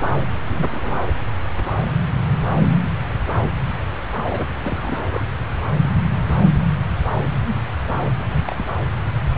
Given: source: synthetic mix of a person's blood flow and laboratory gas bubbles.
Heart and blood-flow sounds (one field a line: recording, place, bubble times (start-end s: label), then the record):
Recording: Doppler ultrasound of blood flow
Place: subclavian vein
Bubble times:
0.49-1.04 s: bubbles
4.24-4.46 s: bubbles
4.64-5.05 s: bubbles
5.10-5.25 s: bubbles
8.03-8.12 s: bubbles
8.19-8.42 s: bubbles
8.46-8.55 s: bubbles
8.57-8.64 s: bubbles
From the record:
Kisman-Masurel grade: 221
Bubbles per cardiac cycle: several, 3 to 8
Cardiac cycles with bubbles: 10 to 50%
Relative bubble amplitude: barely perceptible (0.100 to 0.250)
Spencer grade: 2 (many but less than half of the cardiac periods contain bubble signals, singularly or in groups)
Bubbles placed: anywhere in the cardiac cycle